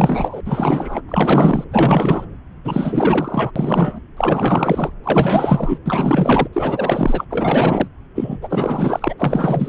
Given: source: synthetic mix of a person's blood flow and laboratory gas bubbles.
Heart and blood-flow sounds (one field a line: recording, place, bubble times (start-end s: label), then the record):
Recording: Doppler ultrasound of blood flow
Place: subclavian vein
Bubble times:
0.00-0.41 s: bubbles
0.46-1.02 s: bubbles
1.08-1.65 s: bubbles
1.72-2.25 s: bubbles
2.65-3.51 s: bubbles
3.55-3.99 s: bubbles
4.17-4.92 s: bubbles
5.04-5.80 s: bubbles
5.86-6.48 s: bubbles
6.53-7.25 s: bubbles
7.30-7.88 s: bubbles
8.15-8.38 s: bubbles
8.41-9.14 s: bubbles
9.18-9.68 s: bubbles
From the record:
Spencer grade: 4 (maximum detectable bubble signal sounding continuously throughout systole and diastole of every cardiac period, and overriding the amplitude of the normal cardiac signals)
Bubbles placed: anywhere in the cardiac cycle